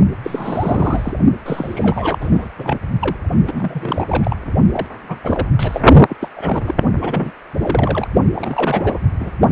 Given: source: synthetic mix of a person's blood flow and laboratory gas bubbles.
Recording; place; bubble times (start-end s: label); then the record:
Doppler ultrasound of blood flow; precordium
0.23-1.14 s: bubbles
1.45-2.50 s: bubbles
2.58-2.79 s: bubbles
2.99-3.17 s: bubbles
3.47-4.36 s: bubbles
4.72-4.86 s: bubbles
5.08-5.17 s: bubbles
5.24-5.48 s: bubbles
5.59-5.80 s: bubbles
6.08-6.17 s: bubbles
6.21-6.30 s: bubbles
6.36-6.75 s: bubbles
7.01-7.31 s: bubbles
7.60-8.08 s: bubbles
8.36-8.98 s: bubbles
9.20-9.31 s: bubbles
From the record:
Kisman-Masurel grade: 342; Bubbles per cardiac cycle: rolling drumbeat, 9 or more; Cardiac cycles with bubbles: 100%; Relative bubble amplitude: moderate (0.250 to 0.450); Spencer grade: 3 (all of the cardiac periods contain showers or single bubble signals, but not dominating or overriding the cardiac motion signals); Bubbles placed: only in the low amplitude regions of the cardiac cycle